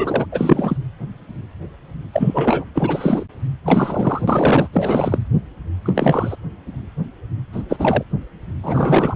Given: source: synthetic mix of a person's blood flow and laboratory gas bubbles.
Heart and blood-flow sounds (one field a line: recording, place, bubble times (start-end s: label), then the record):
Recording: Doppler ultrasound of blood flow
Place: precordium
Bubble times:
0.00-0.26 s: bubbles
0.32-0.78 s: bubbles
2.13-2.65 s: bubbles
2.75-3.24 s: bubbles
3.66-4.68 s: bubbles
4.72-5.18 s: bubbles
5.85-6.35 s: bubbles
7.52-7.62 s: bubbles
7.69-8.04 s: bubbles
8.63-9.16 s: bubbles
From the record:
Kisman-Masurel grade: 333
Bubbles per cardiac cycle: rolling drumbeat, 9 or more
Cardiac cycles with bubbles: 50 to 99%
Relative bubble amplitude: loud (0.450 to 0.775)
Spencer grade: 3 (all of the cardiac periods contain showers or single bubble signals, but not dominating or overriding the cardiac motion signals)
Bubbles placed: anywhere in the cardiac cycle